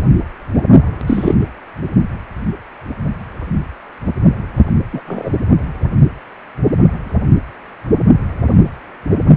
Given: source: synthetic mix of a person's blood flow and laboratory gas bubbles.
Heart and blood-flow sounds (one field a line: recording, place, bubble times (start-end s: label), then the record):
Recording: Doppler ultrasound of blood flow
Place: precordium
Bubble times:
1.06-1.34 s: bubbles
4.92-5.01 s: bubbles
5.07-5.30 s: bubbles
From the record:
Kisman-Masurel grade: 123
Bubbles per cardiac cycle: 1 to 2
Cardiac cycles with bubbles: 10 to 50%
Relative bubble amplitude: loud (0.450 to 0.775)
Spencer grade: 2 (many but less than half of the cardiac periods contain bubble signals, singularly or in groups)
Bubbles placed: only in the low amplitude regions of the cardiac cycle